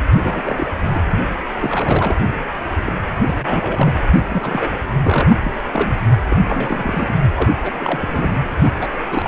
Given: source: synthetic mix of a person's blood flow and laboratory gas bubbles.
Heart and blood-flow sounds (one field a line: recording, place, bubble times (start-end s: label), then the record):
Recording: Doppler ultrasound of blood flow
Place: precordium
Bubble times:
0.22-0.69 s: bubbles
0.94-1.00 s: bubbles
1.11-1.18 s: bubbles
1.59-2.15 s: bubbles
2.85-2.93 s: bubbles
3.26-3.34 s: bubbles
3.40-3.94 s: bubbles
4.15-4.23 s: bubbles
4.31-4.78 s: bubbles
5.03-5.37 s: bubbles
5.45-5.52 s: bubbles
5.73-5.93 s: bubbles
6.30-6.37 s: bubbles
6.46-7.18 s: bubbles
7.36-7.51 s: bubbles
7.62-7.73 s: bubbles
7.79-8.46 s: bubbles
8.61-8.77 s: bubbles
8.80-8.88 s: bubbles
8.92-8.99 s: bubbles
9.10-9.27 s: bubbles
From the record:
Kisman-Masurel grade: 332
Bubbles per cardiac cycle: rolling drumbeat, 9 or more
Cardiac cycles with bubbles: 50 to 99%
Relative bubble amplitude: moderate (0.250 to 0.450)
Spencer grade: 3 (all of the cardiac periods contain showers or single bubble signals, but not dominating or overriding the cardiac motion signals)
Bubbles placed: anywhere in the cardiac cycle